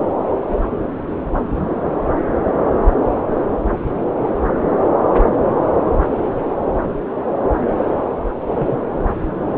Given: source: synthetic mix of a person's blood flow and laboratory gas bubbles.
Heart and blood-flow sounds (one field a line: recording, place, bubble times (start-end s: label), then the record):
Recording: Doppler ultrasound of blood flow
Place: subclavian vein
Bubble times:
8.55-8.79 s: bubbles
From the record:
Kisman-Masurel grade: 113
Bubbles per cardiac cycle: 1 to 2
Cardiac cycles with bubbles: 1 to 10%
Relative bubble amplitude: loud (0.450 to 0.775)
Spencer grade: 1 (occasional bubble signal discernible with the cardiac motion signal, with majority of cardiac periods free of bubbles)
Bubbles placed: anywhere in the cardiac cycle